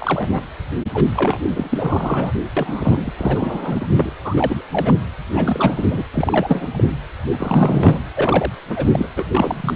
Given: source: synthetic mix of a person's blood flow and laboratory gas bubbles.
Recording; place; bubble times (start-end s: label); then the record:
Doppler ultrasound of blood flow; precordium
0.00-0.43 s: bubbles
0.93-1.06 s: bubbles
1.15-2.33 s: bubbles
2.56-3.12 s: bubbles
3.17-4.12 s: bubbles
4.24-4.64 s: bubbles
4.71-4.94 s: bubbles
5.32-6.04 s: bubbles
6.14-6.68 s: bubbles
6.72-6.83 s: bubbles
7.32-7.99 s: bubbles
8.14-8.52 s: bubbles
8.70-9.07 s: bubbles
9.16-9.24 s: bubbles
9.31-9.76 s: bubbles
From the record:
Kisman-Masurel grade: 343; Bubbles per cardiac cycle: rolling drumbeat, 9 or more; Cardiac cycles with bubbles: 100%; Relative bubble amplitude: loud (0.450 to 0.775); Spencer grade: 3 (all of the cardiac periods contain showers or single bubble signals, but not dominating or overriding the cardiac motion signals); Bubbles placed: anywhere in the cardiac cycle